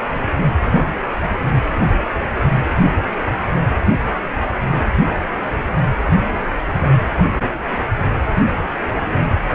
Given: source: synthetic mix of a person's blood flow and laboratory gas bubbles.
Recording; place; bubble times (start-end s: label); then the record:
Doppler ultrasound of blood flow; precordium
no bubbles
From the record:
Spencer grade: 0 (complete lack of bubble signals)